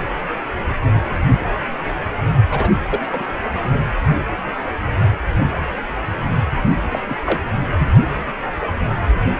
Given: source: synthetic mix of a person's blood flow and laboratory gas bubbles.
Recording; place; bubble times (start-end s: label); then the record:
Doppler ultrasound of blood flow; precordium
2.49-2.71 s: bubbles
2.90-3.00 s: bubbles
3.12-3.23 s: bubbles
6.66-6.79 s: bubbles
6.91-6.99 s: bubbles
7.07-7.17 s: bubbles
7.25-7.40 s: bubbles
7.78-7.91 s: bubbles
From the record:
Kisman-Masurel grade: 222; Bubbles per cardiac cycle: several, 3 to 8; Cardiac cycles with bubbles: 10 to 50%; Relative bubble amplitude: moderate (0.250 to 0.450); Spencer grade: 2 (many but less than half of the cardiac periods contain bubble signals, singularly or in groups); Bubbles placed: anywhere in the cardiac cycle